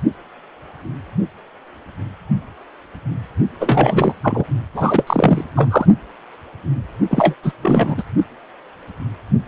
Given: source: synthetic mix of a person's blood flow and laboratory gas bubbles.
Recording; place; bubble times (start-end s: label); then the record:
Doppler ultrasound of blood flow; precordium
3.60-4.13 s: bubbles
4.22-4.45 s: bubbles
4.75-5.04 s: bubbles
5.06-5.44 s: bubbles
5.55-5.85 s: bubbles
7.10-7.34 s: bubbles
7.43-7.53 s: bubbles
7.62-8.03 s: bubbles
From the record:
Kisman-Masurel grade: 223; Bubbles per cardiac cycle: several, 3 to 8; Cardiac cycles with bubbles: 10 to 50%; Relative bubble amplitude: loud (0.450 to 0.775); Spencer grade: 2 (many but less than half of the cardiac periods contain bubble signals, singularly or in groups); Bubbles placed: only in the low amplitude regions of the cardiac cycle